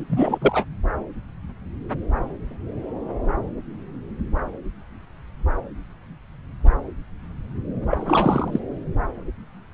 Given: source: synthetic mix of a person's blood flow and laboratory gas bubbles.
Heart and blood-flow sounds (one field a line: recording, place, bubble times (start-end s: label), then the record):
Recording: Doppler ultrasound of blood flow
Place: subclavian vein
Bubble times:
0.00-0.39 s: bubbles
0.41-0.65 s: bubbles
7.90-7.97 s: bubbles
8.01-8.60 s: bubbles
From the record:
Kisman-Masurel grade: 222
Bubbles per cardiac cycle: several, 3 to 8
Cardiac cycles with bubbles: 10 to 50%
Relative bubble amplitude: moderate (0.250 to 0.450)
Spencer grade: 2 (many but less than half of the cardiac periods contain bubble signals, singularly or in groups)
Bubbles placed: anywhere in the cardiac cycle